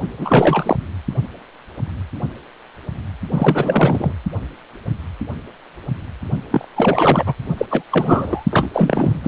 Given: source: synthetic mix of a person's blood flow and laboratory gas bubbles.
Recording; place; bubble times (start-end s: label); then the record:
Doppler ultrasound of blood flow; precordium
0.18-0.77 s: bubbles
3.33-4.12 s: bubbles
6.51-6.66 s: bubbles
6.76-7.35 s: bubbles
7.58-7.66 s: bubbles
7.70-7.84 s: bubbles
7.92-8.46 s: bubbles
8.51-8.70 s: bubbles
8.73-9.21 s: bubbles
9.24-9.28 s: bubbles
From the record:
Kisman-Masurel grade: 333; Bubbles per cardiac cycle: rolling drumbeat, 9 or more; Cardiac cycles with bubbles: 50 to 99%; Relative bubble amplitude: loud (0.450 to 0.775); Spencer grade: 3 (all of the cardiac periods contain showers or single bubble signals, but not dominating or overriding the cardiac motion signals); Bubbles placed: only in the low amplitude regions of the cardiac cycle